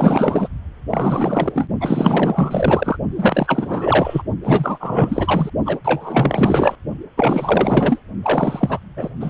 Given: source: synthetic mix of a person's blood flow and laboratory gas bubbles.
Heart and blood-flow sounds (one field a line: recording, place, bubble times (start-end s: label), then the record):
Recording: Doppler ultrasound of blood flow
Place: precordium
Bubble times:
0.00-0.48 s: bubbles
0.90-1.68 s: bubbles
1.80-2.96 s: bubbles
3.16-4.23 s: bubbles
4.42-5.50 s: bubbles
5.65-5.79 s: bubbles
5.84-6.75 s: bubbles
7.16-8.01 s: bubbles
8.22-8.79 s: bubbles
8.96-9.10 s: bubbles
9.20-9.30 s: bubbles
From the record:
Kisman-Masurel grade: 444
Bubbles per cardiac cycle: continuous sound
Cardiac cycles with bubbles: 100%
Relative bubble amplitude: maximal (0.775 to 0.999)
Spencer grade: 4 (maximum detectable bubble signal sounding continuously throughout systole and diastole of every cardiac period, and overriding the amplitude of the normal cardiac signals)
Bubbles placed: only in the low amplitude regions of the cardiac cycle